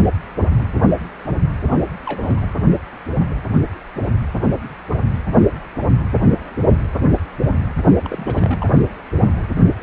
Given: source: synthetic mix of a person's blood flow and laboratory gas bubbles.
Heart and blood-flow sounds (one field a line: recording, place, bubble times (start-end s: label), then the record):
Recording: Doppler ultrasound of blood flow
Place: precordium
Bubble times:
2.06-2.42 s: bubbles
8.01-8.66 s: bubbles
From the record:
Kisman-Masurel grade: 221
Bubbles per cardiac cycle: several, 3 to 8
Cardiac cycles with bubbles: 10 to 50%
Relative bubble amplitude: barely perceptible (0.100 to 0.250)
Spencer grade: 2 (many but less than half of the cardiac periods contain bubble signals, singularly or in groups)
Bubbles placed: only in the low amplitude regions of the cardiac cycle